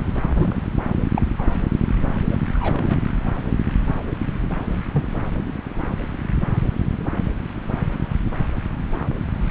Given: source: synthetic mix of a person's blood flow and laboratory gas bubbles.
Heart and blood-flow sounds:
Doppler ultrasound of blood flow; subclavian vein
0.34-0.61 s: bubbles
1.16-1.22 s: bubbles
1.38-1.43 s: bubbles
2.30-2.36 s: bubbles
2.54-2.98 s: bubbles
4.93-5.04 s: bubbles
9.41-9.50 s: bubbles
From the record:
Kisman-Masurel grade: 121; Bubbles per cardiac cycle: 1 to 2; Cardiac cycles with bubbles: 10 to 50%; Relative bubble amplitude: barely perceptible (0.100 to 0.250); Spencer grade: 2 (many but less than half of the cardiac periods contain bubble signals, singularly or in groups); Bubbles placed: anywhere in the cardiac cycle

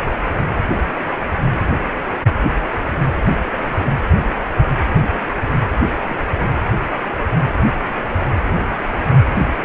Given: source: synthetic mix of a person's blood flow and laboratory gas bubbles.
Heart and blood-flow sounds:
Doppler ultrasound of blood flow; precordium
6.09-6.17 s: bubbles
From the record:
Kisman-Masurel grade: 111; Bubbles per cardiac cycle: 1 to 2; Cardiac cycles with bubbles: 1 to 10%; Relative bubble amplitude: barely perceptible (0.100 to 0.250); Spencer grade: 1 (occasional bubble signal discernible with the cardiac motion signal, with majority of cardiac periods free of bubbles); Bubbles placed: anywhere in the cardiac cycle

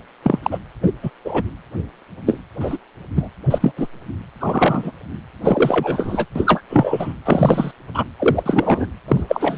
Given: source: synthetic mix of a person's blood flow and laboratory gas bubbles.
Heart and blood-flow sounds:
Doppler ultrasound of blood flow; precordium
0.22-0.39 s: bubbles
0.42-0.58 s: bubbles
0.83-0.92 s: bubbles
1.02-1.10 s: bubbles
1.24-1.42 s: bubbles
2.26-2.40 s: bubbles
2.60-2.77 s: bubbles
3.15-3.29 s: bubbles
3.50-3.72 s: bubbles
3.77-3.88 s: bubbles
4.40-4.92 s: bubbles
5.43-6.25 s: bubbles
6.35-6.61 s: bubbles
6.69-7.13 s: bubbles
7.25-7.71 s: bubbles
7.94-8.04 s: bubbles
8.19-8.43 s: bubbles
8.46-8.87 s: bubbles
9.08-9.23 s: bubbles
9.28-9.58 s: bubbles
From the record:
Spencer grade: 3 (all of the cardiac periods contain showers or single bubble signals, but not dominating or overriding the cardiac motion signals); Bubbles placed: anywhere in the cardiac cycle

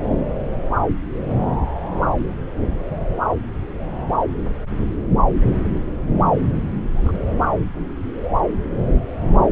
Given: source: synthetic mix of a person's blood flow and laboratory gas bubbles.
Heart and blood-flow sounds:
Doppler ultrasound of blood flow; subclavian vein
6.95-7.18 s: bubbles
From the record:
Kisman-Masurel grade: 111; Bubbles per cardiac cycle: 1 to 2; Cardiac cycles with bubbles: 1 to 10%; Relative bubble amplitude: barely perceptible (0.100 to 0.250); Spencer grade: 1 (occasional bubble signal discernible with the cardiac motion signal, with majority of cardiac periods free of bubbles); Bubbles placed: anywhere in the cardiac cycle

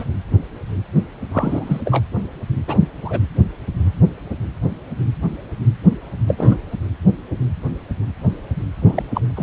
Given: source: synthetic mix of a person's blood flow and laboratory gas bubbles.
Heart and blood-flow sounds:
Doppler ultrasound of blood flow; precordium
0.00-0.04 s: bubbles
1.31-1.81 s: bubbles
1.85-2.04 s: bubbles
2.67-2.88 s: bubbles
3.04-3.20 s: bubbles
6.28-6.58 s: bubbles
8.81-9.03 s: bubbles
9.14-9.21 s: bubbles
9.35-9.43 s: bubbles
From the record:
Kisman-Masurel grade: 222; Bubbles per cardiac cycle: several, 3 to 8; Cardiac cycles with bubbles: 10 to 50%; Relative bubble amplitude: moderate (0.250 to 0.450); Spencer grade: 2 (many but less than half of the cardiac periods contain bubble signals, singularly or in groups); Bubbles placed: anywhere in the cardiac cycle

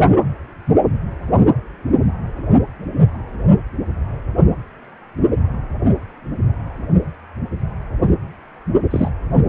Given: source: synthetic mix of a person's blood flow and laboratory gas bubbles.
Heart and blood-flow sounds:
Doppler ultrasound of blood flow; precordium
8.90-9.09 s: bubbles
From the record:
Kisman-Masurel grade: 123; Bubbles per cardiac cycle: 1 to 2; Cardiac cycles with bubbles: 10 to 50%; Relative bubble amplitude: loud (0.450 to 0.775); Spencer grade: 2 (many but less than half of the cardiac periods contain bubble signals, singularly or in groups); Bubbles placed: only in the low amplitude regions of the cardiac cycle

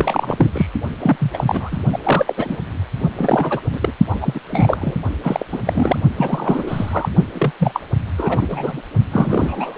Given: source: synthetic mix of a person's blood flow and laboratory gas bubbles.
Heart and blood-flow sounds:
Doppler ultrasound of blood flow; precordium
0.00-0.50 s: bubbles
0.55-0.67 s: bubbles
0.99-1.44 s: bubbles
1.47-1.78 s: bubbles
1.92-1.98 s: bubbles
2.03-2.58 s: bubbles
3.15-3.60 s: bubbles
3.72-3.92 s: bubbles
4.10-4.18 s: bubbles
4.21-4.40 s: bubbles
4.51-4.97 s: bubbles
5.23-5.46 s: bubbles
5.52-5.59 s: bubbles
5.65-5.98 s: bubbles
6.17-7.09 s: bubbles
7.34-7.51 s: bubbles
7.59-7.80 s: bubbles
8.17-8.81 s: bubbles
9.12-9.78 s: bubbles
From the record:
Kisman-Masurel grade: 342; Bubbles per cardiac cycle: rolling drumbeat, 9 or more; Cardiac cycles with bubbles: 100%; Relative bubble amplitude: moderate (0.250 to 0.450); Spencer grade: 3 (all of the cardiac periods contain showers or single bubble signals, but not dominating or overriding the cardiac motion signals); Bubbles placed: only in the low amplitude regions of the cardiac cycle

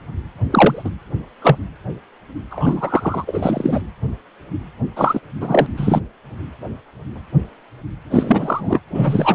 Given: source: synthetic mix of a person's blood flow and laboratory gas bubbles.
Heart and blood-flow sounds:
Doppler ultrasound of blood flow; precordium
0.51-0.90 s: bubbles
1.42-1.57 s: bubbles
2.50-3.81 s: bubbles
4.96-5.19 s: bubbles
5.40-5.67 s: bubbles
5.76-6.01 s: bubbles
8.11-8.80 s: bubbles
8.94-9.35 s: bubbles
From the record:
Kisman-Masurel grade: 233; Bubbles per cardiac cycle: several, 3 to 8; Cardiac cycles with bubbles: 50 to 99%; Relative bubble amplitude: loud (0.450 to 0.775); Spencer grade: 3 (all of the cardiac periods contain showers or single bubble signals, but not dominating or overriding the cardiac motion signals); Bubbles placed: anywhere in the cardiac cycle

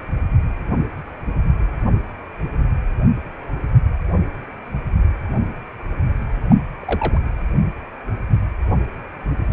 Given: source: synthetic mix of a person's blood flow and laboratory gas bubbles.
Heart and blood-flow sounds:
Doppler ultrasound of blood flow; precordium
6.50-6.57 s: bubbles
6.79-7.19 s: bubbles
From the record:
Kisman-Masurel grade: 122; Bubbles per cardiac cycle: 1 to 2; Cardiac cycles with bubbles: 10 to 50%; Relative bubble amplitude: moderate (0.250 to 0.450); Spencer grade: 2 (many but less than half of the cardiac periods contain bubble signals, singularly or in groups); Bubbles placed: anywhere in the cardiac cycle

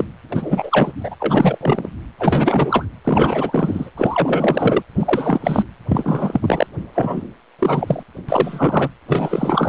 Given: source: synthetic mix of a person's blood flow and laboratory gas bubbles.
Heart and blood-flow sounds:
Doppler ultrasound of blood flow; precordium
0.00-0.05 s: bubbles
0.32-0.92 s: bubbles
0.98-1.16 s: bubbles
1.20-1.58 s: bubbles
1.60-1.89 s: bubbles
2.20-2.85 s: bubbles
3.04-3.90 s: bubbles
3.97-4.82 s: bubbles
4.98-5.67 s: bubbles
5.88-6.67 s: bubbles
6.94-7.22 s: bubbles
7.58-8.03 s: bubbles
8.29-8.89 s: bubbles
9.07-9.69 s: bubbles
From the record:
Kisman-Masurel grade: 343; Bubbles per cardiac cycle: rolling drumbeat, 9 or more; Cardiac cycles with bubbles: 100%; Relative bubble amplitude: loud (0.450 to 0.775); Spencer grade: 3 (all of the cardiac periods contain showers or single bubble signals, but not dominating or overriding the cardiac motion signals); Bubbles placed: anywhere in the cardiac cycle

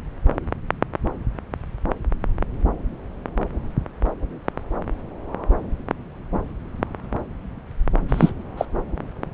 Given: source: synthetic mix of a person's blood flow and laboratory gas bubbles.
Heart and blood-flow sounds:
Doppler ultrasound of blood flow; subclavian vein
8.08-8.31 s: bubbles
8.57-8.65 s: bubbles
From the record:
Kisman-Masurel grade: 212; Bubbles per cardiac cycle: several, 3 to 8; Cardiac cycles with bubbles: 1 to 10%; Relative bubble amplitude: moderate (0.250 to 0.450); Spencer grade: 1 (occasional bubble signal discernible with the cardiac motion signal, with majority of cardiac periods free of bubbles); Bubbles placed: anywhere in the cardiac cycle

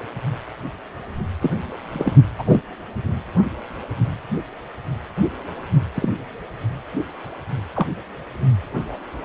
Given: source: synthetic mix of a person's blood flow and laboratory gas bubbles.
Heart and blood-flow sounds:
Doppler ultrasound of blood flow; precordium
1.42-1.51 s: bubbles
1.93-2.13 s: bubbles
2.38-2.60 s: bubbles
5.94-6.09 s: bubbles
7.75-7.86 s: bubbles
From the record:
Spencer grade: 2 (many but less than half of the cardiac periods contain bubble signals, singularly or in groups); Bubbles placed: only in the low amplitude regions of the cardiac cycle

